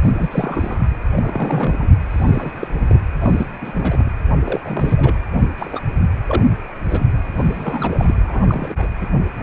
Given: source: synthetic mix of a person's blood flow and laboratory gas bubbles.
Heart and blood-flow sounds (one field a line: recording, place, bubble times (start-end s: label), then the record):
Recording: Doppler ultrasound of blood flow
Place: precordium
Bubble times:
0.02-0.87 s: bubbles
1.13-1.89 s: bubbles
2.10-2.51 s: bubbles
2.56-2.67 s: bubbles
2.88-2.99 s: bubbles
3.21-3.46 s: bubbles
3.61-4.12 s: bubbles
4.45-4.61 s: bubbles
4.63-5.16 s: bubbles
5.58-5.81 s: bubbles
6.26-6.45 s: bubbles
6.89-7.07 s: bubbles
7.37-8.15 s: bubbles
8.22-8.88 s: bubbles
9.01-9.07 s: bubbles
From the record:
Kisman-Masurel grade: 242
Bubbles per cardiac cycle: several, 3 to 8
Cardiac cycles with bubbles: 100%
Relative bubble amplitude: moderate (0.250 to 0.450)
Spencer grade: 3 (all of the cardiac periods contain showers or single bubble signals, but not dominating or overriding the cardiac motion signals)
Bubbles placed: anywhere in the cardiac cycle